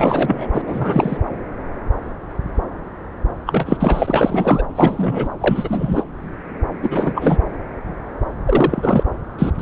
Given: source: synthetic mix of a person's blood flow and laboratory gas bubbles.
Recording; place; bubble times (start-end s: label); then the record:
Doppler ultrasound of blood flow; subclavian vein
0.00-0.47 s: bubbles
0.53-0.62 s: bubbles
0.67-1.17 s: bubbles
3.46-3.77 s: bubbles
3.80-4.62 s: bubbles
4.75-5.29 s: bubbles
5.40-6.04 s: bubbles
6.83-7.38 s: bubbles
8.46-9.04 s: bubbles
9.38-9.51 s: bubbles
9.58-9.62 s: bubbles
From the record:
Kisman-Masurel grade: 333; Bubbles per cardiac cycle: rolling drumbeat, 9 or more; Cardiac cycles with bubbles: 50 to 99%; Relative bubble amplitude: loud (0.450 to 0.775); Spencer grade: 3 (all of the cardiac periods contain showers or single bubble signals, but not dominating or overriding the cardiac motion signals); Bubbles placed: anywhere in the cardiac cycle